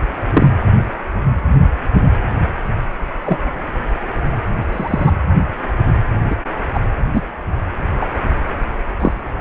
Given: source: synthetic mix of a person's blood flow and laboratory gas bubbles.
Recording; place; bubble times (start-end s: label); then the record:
Doppler ultrasound of blood flow; precordium
0.33-0.46 s: bubbles
3.25-3.38 s: bubbles
4.72-5.15 s: bubbles
6.30-6.36 s: bubbles
6.74-6.81 s: bubbles
7.13-7.27 s: bubbles
8.01-8.08 s: bubbles
9.00-9.12 s: bubbles
From the record:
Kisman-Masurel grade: 123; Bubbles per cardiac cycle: 1 to 2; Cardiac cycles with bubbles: 10 to 50%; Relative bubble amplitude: loud (0.450 to 0.775); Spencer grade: 2 (many but less than half of the cardiac periods contain bubble signals, singularly or in groups); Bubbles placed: anywhere in the cardiac cycle